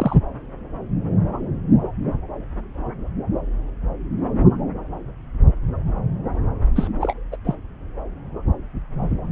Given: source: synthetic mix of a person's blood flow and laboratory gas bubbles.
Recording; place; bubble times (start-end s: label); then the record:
Doppler ultrasound of blood flow; subclavian vein
0.00-0.16 s: bubbles
6.75-6.88 s: bubbles
7.01-7.13 s: bubbles
7.32-7.37 s: bubbles
7.45-7.55 s: bubbles
From the record:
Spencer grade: 2 (many but less than half of the cardiac periods contain bubble signals, singularly or in groups); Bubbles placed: anywhere in the cardiac cycle